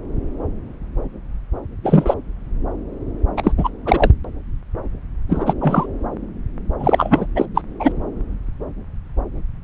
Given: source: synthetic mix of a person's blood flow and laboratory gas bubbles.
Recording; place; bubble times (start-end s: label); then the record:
Doppler ultrasound of blood flow; subclavian vein
1.83-2.15 s: bubbles
3.37-3.52 s: bubbles
3.57-3.70 s: bubbles
3.85-4.12 s: bubbles
5.29-5.54 s: bubbles
5.60-5.87 s: bubbles
6.79-7.26 s: bubbles
7.35-7.46 s: bubbles
7.54-7.61 s: bubbles
7.79-7.92 s: bubbles
From the record:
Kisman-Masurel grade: 223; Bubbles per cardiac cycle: several, 3 to 8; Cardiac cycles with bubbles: 10 to 50%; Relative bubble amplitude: loud (0.450 to 0.775); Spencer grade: 2 (many but less than half of the cardiac periods contain bubble signals, singularly or in groups); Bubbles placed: anywhere in the cardiac cycle